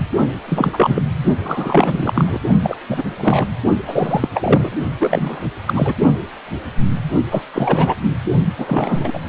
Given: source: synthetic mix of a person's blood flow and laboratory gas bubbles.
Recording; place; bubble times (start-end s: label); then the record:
Doppler ultrasound of blood flow; precordium
0.46-1.02 s: bubbles
1.40-2.40 s: bubbles
2.62-2.77 s: bubbles
2.89-3.04 s: bubbles
3.17-3.47 s: bubbles
3.87-4.29 s: bubbles
4.33-4.70 s: bubbles
5.00-5.48 s: bubbles
5.67-5.95 s: bubbles
7.30-7.42 s: bubbles
7.53-7.96 s: bubbles
8.57-9.19 s: bubbles
From the record:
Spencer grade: 3 (all of the cardiac periods contain showers or single bubble signals, but not dominating or overriding the cardiac motion signals); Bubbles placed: only in the low amplitude regions of the cardiac cycle